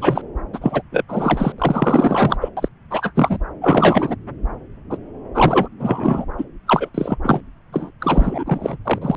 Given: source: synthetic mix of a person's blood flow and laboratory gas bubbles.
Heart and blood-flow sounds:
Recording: Doppler ultrasound of blood flow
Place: subclavian vein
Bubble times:
0.00-0.21 s: bubbles
0.52-0.82 s: bubbles
0.92-1.04 s: bubbles
1.08-1.52 s: bubbles
1.58-2.37 s: bubbles
2.40-2.49 s: bubbles
2.57-2.68 s: bubbles
2.91-3.12 s: bubbles
3.15-3.38 s: bubbles
3.61-4.15 s: bubbles
4.89-4.97 s: bubbles
5.34-5.68 s: bubbles
5.79-6.25 s: bubbles
6.38-6.44 s: bubbles
6.67-6.89 s: bubbles
6.94-7.17 s: bubbles
7.23-7.40 s: bubbles
7.72-7.90 s: bubbles
8.00-8.77 s: bubbles
8.85-8.99 s: bubbles
9.02-9.15 s: bubbles
From the record:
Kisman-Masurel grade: 343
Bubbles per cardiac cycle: rolling drumbeat, 9 or more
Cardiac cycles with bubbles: 100%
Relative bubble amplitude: loud (0.450 to 0.775)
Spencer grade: 3 (all of the cardiac periods contain showers or single bubble signals, but not dominating or overriding the cardiac motion signals)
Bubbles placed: anywhere in the cardiac cycle

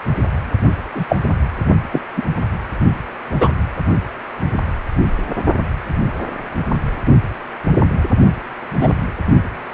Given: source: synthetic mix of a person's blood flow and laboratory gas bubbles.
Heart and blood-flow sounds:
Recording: Doppler ultrasound of blood flow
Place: precordium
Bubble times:
0.95-1.04 s: bubbles
1.08-1.16 s: bubbles
1.91-2.01 s: bubbles
2.17-2.23 s: bubbles
3.40-3.49 s: bubbles
8.77-8.94 s: bubbles
From the record:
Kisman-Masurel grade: 123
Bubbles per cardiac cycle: 1 to 2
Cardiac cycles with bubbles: 10 to 50%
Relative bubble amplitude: loud (0.450 to 0.775)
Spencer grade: 2 (many but less than half of the cardiac periods contain bubble signals, singularly or in groups)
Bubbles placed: only in the low amplitude regions of the cardiac cycle

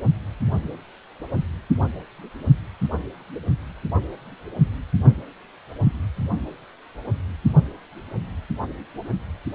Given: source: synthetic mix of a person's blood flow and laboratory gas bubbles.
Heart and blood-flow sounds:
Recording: Doppler ultrasound of blood flow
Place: precordium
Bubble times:
no bubbles
From the record:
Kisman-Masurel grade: 000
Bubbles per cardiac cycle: 0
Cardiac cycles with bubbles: 0%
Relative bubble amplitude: no bubbles discernible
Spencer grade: 0 (complete lack of bubble signals)

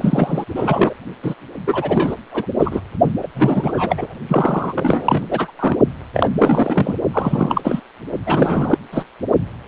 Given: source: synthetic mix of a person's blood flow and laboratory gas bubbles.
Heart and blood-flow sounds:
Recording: Doppler ultrasound of blood flow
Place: precordium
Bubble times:
0.00-0.44 s: bubbles
0.55-0.93 s: bubbles
1.23-1.35 s: bubbles
1.67-2.16 s: bubbles
2.31-2.46 s: bubbles
2.59-2.81 s: bubbles
3.22-3.27 s: bubbles
3.35-4.16 s: bubbles
4.28-5.26 s: bubbles
5.30-5.51 s: bubbles
5.59-5.77 s: bubbles
6.13-6.29 s: bubbles
6.38-6.94 s: bubbles
7.13-7.80 s: bubbles
8.25-8.78 s: bubbles
8.92-9.05 s: bubbles
From the record:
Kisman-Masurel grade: 333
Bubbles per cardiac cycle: rolling drumbeat, 9 or more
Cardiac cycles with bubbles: 50 to 99%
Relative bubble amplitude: loud (0.450 to 0.775)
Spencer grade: 3 (all of the cardiac periods contain showers or single bubble signals, but not dominating or overriding the cardiac motion signals)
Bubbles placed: only in the low amplitude regions of the cardiac cycle

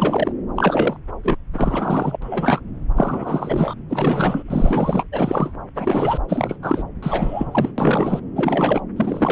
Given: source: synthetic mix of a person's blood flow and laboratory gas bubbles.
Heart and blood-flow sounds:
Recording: Doppler ultrasound of blood flow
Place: subclavian vein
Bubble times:
0.00-0.32 s: bubbles
0.56-0.98 s: bubbles
1.23-1.36 s: bubbles
1.53-2.17 s: bubbles
2.22-2.60 s: bubbles
2.95-3.74 s: bubbles
3.89-4.43 s: bubbles
4.48-5.05 s: bubbles
5.12-5.54 s: bubbles
5.75-6.18 s: bubbles
6.28-6.57 s: bubbles
6.62-6.84 s: bubbles
7.02-7.71 s: bubbles
7.78-8.20 s: bubbles
8.36-8.80 s: bubbles
8.96-9.32 s: bubbles
From the record:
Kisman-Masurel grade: 343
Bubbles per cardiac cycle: rolling drumbeat, 9 or more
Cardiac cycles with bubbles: 100%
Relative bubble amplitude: loud (0.450 to 0.775)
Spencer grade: 3 (all of the cardiac periods contain showers or single bubble signals, but not dominating or overriding the cardiac motion signals)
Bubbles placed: anywhere in the cardiac cycle

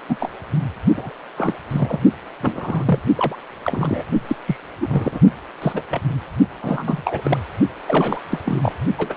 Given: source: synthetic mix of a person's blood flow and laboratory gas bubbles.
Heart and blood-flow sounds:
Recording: Doppler ultrasound of blood flow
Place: precordium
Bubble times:
0.09-0.17 s: bubbles
0.19-0.31 s: bubbles
0.96-1.10 s: bubbles
1.37-1.54 s: bubbles
1.70-1.99 s: bubbles
2.40-2.99 s: bubbles
3.15-3.35 s: bubbles
3.64-4.03 s: bubbles
4.27-4.36 s: bubbles
4.46-4.56 s: bubbles
4.80-5.20 s: bubbles
5.62-5.81 s: bubbles
5.90-6.00 s: bubbles
6.62-7.39 s: bubbles
7.87-8.19 s: bubbles
8.31-8.38 s: bubbles
8.45-8.72 s: bubbles
8.98-9.15 s: bubbles
From the record:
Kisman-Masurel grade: 242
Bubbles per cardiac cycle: several, 3 to 8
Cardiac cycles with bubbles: 100%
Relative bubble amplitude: moderate (0.250 to 0.450)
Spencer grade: 3 (all of the cardiac periods contain showers or single bubble signals, but not dominating or overriding the cardiac motion signals)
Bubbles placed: only in the low amplitude regions of the cardiac cycle

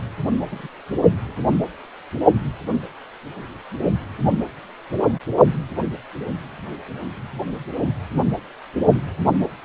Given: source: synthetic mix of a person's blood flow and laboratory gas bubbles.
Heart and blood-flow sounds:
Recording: Doppler ultrasound of blood flow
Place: precordium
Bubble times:
0.50-0.68 s: bubbles
From the record:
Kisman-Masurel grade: 111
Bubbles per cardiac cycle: 1 to 2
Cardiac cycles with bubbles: 1 to 10%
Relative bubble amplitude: barely perceptible (0.100 to 0.250)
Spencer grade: 1 (occasional bubble signal discernible with the cardiac motion signal, with majority of cardiac periods free of bubbles)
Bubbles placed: only in the low amplitude regions of the cardiac cycle

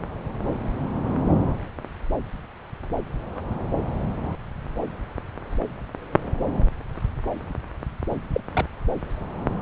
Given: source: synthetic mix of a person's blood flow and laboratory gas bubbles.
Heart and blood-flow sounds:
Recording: Doppler ultrasound of blood flow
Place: subclavian vein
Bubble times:
8.32-8.40 s: bubbles
8.54-8.65 s: bubbles
From the record:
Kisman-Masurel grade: 112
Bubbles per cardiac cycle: 1 to 2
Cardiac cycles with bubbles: 1 to 10%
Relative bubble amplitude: moderate (0.250 to 0.450)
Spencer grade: 1 (occasional bubble signal discernible with the cardiac motion signal, with majority of cardiac periods free of bubbles)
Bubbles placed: anywhere in the cardiac cycle

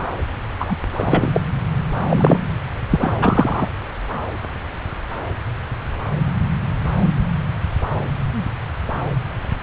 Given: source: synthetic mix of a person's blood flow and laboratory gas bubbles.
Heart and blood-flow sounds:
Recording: Doppler ultrasound of blood flow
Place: subclavian vein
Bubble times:
0.59-0.78 s: bubbles
0.97-1.40 s: bubbles
2.09-2.41 s: bubbles
2.91-3.14 s: bubbles
3.22-3.69 s: bubbles
From the record:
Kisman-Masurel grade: 223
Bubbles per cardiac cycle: several, 3 to 8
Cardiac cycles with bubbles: 10 to 50%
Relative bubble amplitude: loud (0.450 to 0.775)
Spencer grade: 2 (many but less than half of the cardiac periods contain bubble signals, singularly or in groups)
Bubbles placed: anywhere in the cardiac cycle

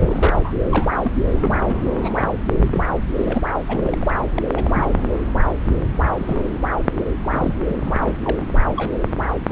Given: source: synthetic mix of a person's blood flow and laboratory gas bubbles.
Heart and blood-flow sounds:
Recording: Doppler ultrasound of blood flow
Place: subclavian vein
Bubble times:
0.00-0.41 s: bubbles
0.43-0.52 s: bubbles
0.69-0.87 s: bubbles
1.02-1.12 s: bubbles
1.40-1.56 s: bubbles
1.69-1.79 s: bubbles
2.00-2.27 s: bubbles
2.71-2.84 s: bubbles
3.16-3.43 s: bubbles
3.68-4.10 s: bubbles
4.34-4.42 s: bubbles
4.54-4.92 s: bubbles
6.17-6.59 s: bubbles
7.21-7.57 s: bubbles
7.68-7.76 s: bubbles
7.83-7.93 s: bubbles
7.98-8.21 s: bubbles
8.24-8.46 s: bubbles
8.75-8.96 s: bubbles
9.47-9.52 s: bubbles
From the record:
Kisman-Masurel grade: 242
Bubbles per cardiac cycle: several, 3 to 8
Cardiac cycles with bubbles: 100%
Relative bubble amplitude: moderate (0.250 to 0.450)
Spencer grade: 3 (all of the cardiac periods contain showers or single bubble signals, but not dominating or overriding the cardiac motion signals)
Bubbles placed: anywhere in the cardiac cycle

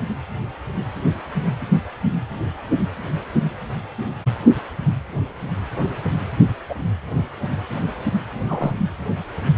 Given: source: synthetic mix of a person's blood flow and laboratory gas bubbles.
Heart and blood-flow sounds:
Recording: Doppler ultrasound of blood flow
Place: precordium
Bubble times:
6.69-6.74 s: bubbles
8.48-8.71 s: bubbles
From the record:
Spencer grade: 2 (many but less than half of the cardiac periods contain bubble signals, singularly or in groups)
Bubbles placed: anywhere in the cardiac cycle

